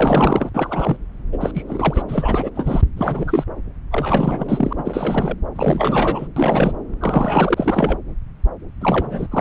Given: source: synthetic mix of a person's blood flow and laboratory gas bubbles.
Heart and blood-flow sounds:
Doppler ultrasound of blood flow; subclavian vein
0.00-0.51 s: bubbles
0.54-0.97 s: bubbles
1.32-1.38 s: bubbles
1.40-1.51 s: bubbles
1.54-1.62 s: bubbles
1.68-2.03 s: bubbles
2.08-2.52 s: bubbles
2.55-2.81 s: bubbles
2.96-3.44 s: bubbles
3.91-4.73 s: bubbles
4.78-5.36 s: bubbles
5.55-6.28 s: bubbles
6.36-6.72 s: bubbles
7.01-7.96 s: bubbles
8.81-9.28 s: bubbles
9.31-9.41 s: bubbles
From the record:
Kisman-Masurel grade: 333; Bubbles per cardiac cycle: rolling drumbeat, 9 or more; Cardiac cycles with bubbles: 50 to 99%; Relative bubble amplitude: loud (0.450 to 0.775); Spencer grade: 3 (all of the cardiac periods contain showers or single bubble signals, but not dominating or overriding the cardiac motion signals); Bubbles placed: anywhere in the cardiac cycle

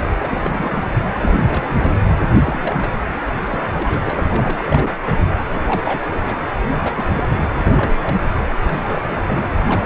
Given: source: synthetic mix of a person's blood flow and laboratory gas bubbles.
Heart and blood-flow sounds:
Doppler ultrasound of blood flow; precordium
0.00-0.18 s: bubbles
0.22-0.94 s: bubbles
1.12-1.97 s: bubbles
2.42-2.76 s: bubbles
2.79-2.91 s: bubbles
3.42-3.65 s: bubbles
3.73-4.92 s: bubbles
5.00-5.13 s: bubbles
5.17-5.25 s: bubbles
5.50-6.08 s: bubbles
6.10-6.21 s: bubbles
6.25-6.38 s: bubbles
6.71-7.42 s: bubbles
7.58-8.44 s: bubbles
8.62-9.18 s: bubbles
9.26-9.49 s: bubbles
9.66-9.86 s: bubbles
From the record:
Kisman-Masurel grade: 342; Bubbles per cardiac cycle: rolling drumbeat, 9 or more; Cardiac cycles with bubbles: 100%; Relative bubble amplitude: moderate (0.250 to 0.450); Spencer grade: 3 (all of the cardiac periods contain showers or single bubble signals, but not dominating or overriding the cardiac motion signals); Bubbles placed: anywhere in the cardiac cycle

